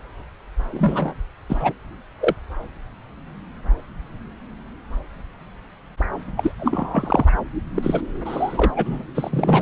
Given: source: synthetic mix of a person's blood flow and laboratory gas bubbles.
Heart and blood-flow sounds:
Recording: Doppler ultrasound of blood flow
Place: subclavian vein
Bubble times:
0.72-1.15 s: bubbles
1.49-1.72 s: bubbles
2.20-2.34 s: bubbles
6.36-6.51 s: bubbles
6.59-7.34 s: bubbles
7.75-8.01 s: bubbles
8.25-8.71 s: bubbles
8.75-9.04 s: bubbles
9.14-9.29 s: bubbles
9.32-9.62 s: bubbles
From the record:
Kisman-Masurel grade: 222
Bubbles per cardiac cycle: several, 3 to 8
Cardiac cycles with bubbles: 10 to 50%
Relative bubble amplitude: moderate (0.250 to 0.450)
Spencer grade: 2 (many but less than half of the cardiac periods contain bubble signals, singularly or in groups)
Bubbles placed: anywhere in the cardiac cycle

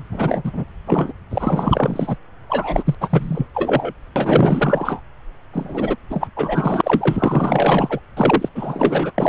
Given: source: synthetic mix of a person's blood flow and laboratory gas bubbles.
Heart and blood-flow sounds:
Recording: Doppler ultrasound of blood flow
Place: subclavian vein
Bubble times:
0.00-0.04 s: bubbles
0.12-0.65 s: bubbles
0.86-1.13 s: bubbles
1.31-2.17 s: bubbles
2.49-2.95 s: bubbles
3.00-3.47 s: bubbles
3.54-3.93 s: bubbles
4.16-5.00 s: bubbles
5.53-5.96 s: bubbles
6.10-6.28 s: bubbles
6.36-8.00 s: bubbles
8.16-8.49 s: bubbles
8.55-9.12 s: bubbles
9.18-9.29 s: bubbles
From the record:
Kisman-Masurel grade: 444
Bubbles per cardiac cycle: continuous sound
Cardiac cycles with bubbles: 100%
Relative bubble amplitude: maximal (0.775 to 0.999)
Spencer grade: 4 (maximum detectable bubble signal sounding continuously throughout systole and diastole of every cardiac period, and overriding the amplitude of the normal cardiac signals)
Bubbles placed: anywhere in the cardiac cycle

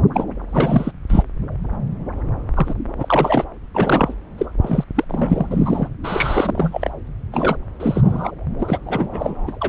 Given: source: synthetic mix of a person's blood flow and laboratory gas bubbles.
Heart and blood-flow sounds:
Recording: Doppler ultrasound of blood flow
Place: subclavian vein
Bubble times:
0.14-0.24 s: bubbles
0.52-0.91 s: bubbles
1.09-1.23 s: bubbles
2.54-2.74 s: bubbles
2.96-3.44 s: bubbles
3.74-4.14 s: bubbles
4.38-4.46 s: bubbles
4.61-4.84 s: bubbles
4.95-5.04 s: bubbles
5.08-5.46 s: bubbles
5.50-5.88 s: bubbles
6.04-6.91 s: bubbles
7.32-7.56 s: bubbles
7.79-8.31 s: bubbles
8.59-8.79 s: bubbles
8.86-9.54 s: bubbles
9.61-9.69 s: bubbles
From the record:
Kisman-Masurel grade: 332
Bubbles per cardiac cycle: rolling drumbeat, 9 or more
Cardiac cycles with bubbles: 50 to 99%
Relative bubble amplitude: moderate (0.250 to 0.450)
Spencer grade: 3 (all of the cardiac periods contain showers or single bubble signals, but not dominating or overriding the cardiac motion signals)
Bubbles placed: anywhere in the cardiac cycle

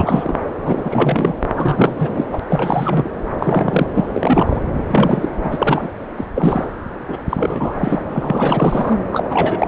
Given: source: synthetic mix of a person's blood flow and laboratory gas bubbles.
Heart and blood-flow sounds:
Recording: Doppler ultrasound of blood flow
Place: subclavian vein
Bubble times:
0.00-0.35 s: bubbles
0.63-1.34 s: bubbles
1.55-2.26 s: bubbles
2.33-2.38 s: bubbles
2.49-3.12 s: bubbles
3.39-3.87 s: bubbles
3.94-4.07 s: bubbles
4.12-4.61 s: bubbles
4.73-5.29 s: bubbles
5.43-5.88 s: bubbles
6.17-6.25 s: bubbles
6.35-6.65 s: bubbles
7.07-7.17 s: bubbles
7.29-7.73 s: bubbles
7.77-8.02 s: bubbles
8.14-8.97 s: bubbles
9.12-9.68 s: bubbles
From the record:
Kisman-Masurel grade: 343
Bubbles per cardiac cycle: rolling drumbeat, 9 or more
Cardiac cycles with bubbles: 100%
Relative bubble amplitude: loud (0.450 to 0.775)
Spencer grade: 3 (all of the cardiac periods contain showers or single bubble signals, but not dominating or overriding the cardiac motion signals)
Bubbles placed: anywhere in the cardiac cycle

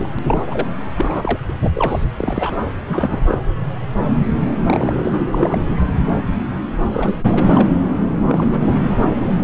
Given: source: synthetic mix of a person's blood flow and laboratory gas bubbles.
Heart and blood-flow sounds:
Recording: Doppler ultrasound of blood flow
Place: subclavian vein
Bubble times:
0.00-0.09 s: bubbles
0.15-0.19 s: bubbles
0.27-0.42 s: bubbles
0.47-0.67 s: bubbles
0.97-1.38 s: bubbles
1.49-1.54 s: bubbles
1.61-1.72 s: bubbles
1.74-2.04 s: bubbles
2.17-2.59 s: bubbles
2.86-3.38 s: bubbles
4.64-5.23 s: bubbles
5.27-5.62 s: bubbles
6.92-7.16 s: bubbles
7.30-7.69 s: bubbles
8.29-8.68 s: bubbles
9.22-9.44 s: bubbles
From the record:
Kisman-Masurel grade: 232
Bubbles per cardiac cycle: several, 3 to 8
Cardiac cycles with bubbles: 50 to 99%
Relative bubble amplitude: moderate (0.250 to 0.450)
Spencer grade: 3 (all of the cardiac periods contain showers or single bubble signals, but not dominating or overriding the cardiac motion signals)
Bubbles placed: anywhere in the cardiac cycle

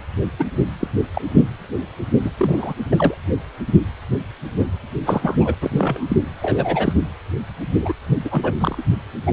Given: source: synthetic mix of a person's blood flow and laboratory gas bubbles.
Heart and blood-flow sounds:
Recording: Doppler ultrasound of blood flow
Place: precordium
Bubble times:
0.39-0.45 s: bubbles
0.80-0.87 s: bubbles
1.13-1.21 s: bubbles
2.21-2.31 s: bubbles
2.37-2.74 s: bubbles
2.91-3.15 s: bubbles
5.05-5.36 s: bubbles
5.38-5.55 s: bubbles
5.62-6.17 s: bubbles
6.42-6.94 s: bubbles
7.78-7.93 s: bubbles
8.24-8.53 s: bubbles
8.58-8.82 s: bubbles
9.25-9.33 s: bubbles
From the record:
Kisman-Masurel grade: 233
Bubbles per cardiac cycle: several, 3 to 8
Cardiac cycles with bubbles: 50 to 99%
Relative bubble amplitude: loud (0.450 to 0.775)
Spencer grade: 3 (all of the cardiac periods contain showers or single bubble signals, but not dominating or overriding the cardiac motion signals)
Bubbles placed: anywhere in the cardiac cycle

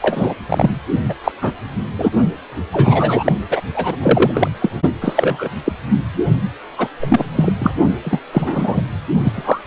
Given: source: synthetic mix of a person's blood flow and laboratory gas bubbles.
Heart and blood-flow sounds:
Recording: Doppler ultrasound of blood flow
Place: precordium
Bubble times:
0.02-0.35 s: bubbles
0.48-0.74 s: bubbles
1.09-1.14 s: bubbles
1.24-1.32 s: bubbles
1.41-1.51 s: bubbles
1.98-2.10 s: bubbles
2.73-3.32 s: bubbles
3.50-3.60 s: bubbles
3.74-3.96 s: bubbles
4.00-4.32 s: bubbles
4.34-4.49 s: bubbles
4.61-4.70 s: bubbles
5.01-5.48 s: bubbles
5.65-5.73 s: bubbles
6.78-6.88 s: bubbles
7.02-7.26 s: bubbles
7.35-7.53 s: bubbles
7.59-7.72 s: bubbles
8.04-8.20 s: bubbles
8.33-8.82 s: bubbles
9.24-9.62 s: bubbles
From the record:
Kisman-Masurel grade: 243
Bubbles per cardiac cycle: several, 3 to 8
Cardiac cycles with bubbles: 100%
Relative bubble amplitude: loud (0.450 to 0.775)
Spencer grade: 3 (all of the cardiac periods contain showers or single bubble signals, but not dominating or overriding the cardiac motion signals)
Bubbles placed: only in the low amplitude regions of the cardiac cycle

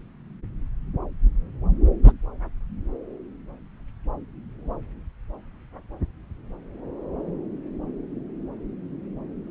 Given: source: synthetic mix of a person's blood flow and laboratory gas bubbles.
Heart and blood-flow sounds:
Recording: Doppler ultrasound of blood flow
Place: subclavian vein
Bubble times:
2.04-2.12 s: bubbles
From the record:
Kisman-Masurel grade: 112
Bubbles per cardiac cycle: 1 to 2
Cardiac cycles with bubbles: 1 to 10%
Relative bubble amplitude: moderate (0.250 to 0.450)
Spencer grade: 1 (occasional bubble signal discernible with the cardiac motion signal, with majority of cardiac periods free of bubbles)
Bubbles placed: anywhere in the cardiac cycle

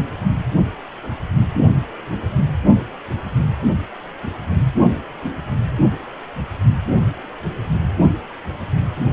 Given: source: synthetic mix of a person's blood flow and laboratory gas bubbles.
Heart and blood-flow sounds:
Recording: Doppler ultrasound of blood flow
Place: precordium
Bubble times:
no bubbles
From the record:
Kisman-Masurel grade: 000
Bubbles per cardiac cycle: 0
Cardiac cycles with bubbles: 0%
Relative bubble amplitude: no bubbles discernible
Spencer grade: 0 (complete lack of bubble signals)

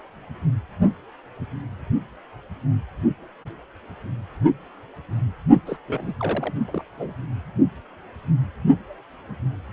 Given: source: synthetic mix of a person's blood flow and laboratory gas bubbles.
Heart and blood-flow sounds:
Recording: Doppler ultrasound of blood flow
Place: precordium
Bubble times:
5.66-5.77 s: bubbles
5.88-6.14 s: bubbles
6.20-6.54 s: bubbles
6.68-6.83 s: bubbles
6.98-7.14 s: bubbles
From the record:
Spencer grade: 1 (occasional bubble signal discernible with the cardiac motion signal, with majority of cardiac periods free of bubbles)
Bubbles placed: only in the low amplitude regions of the cardiac cycle

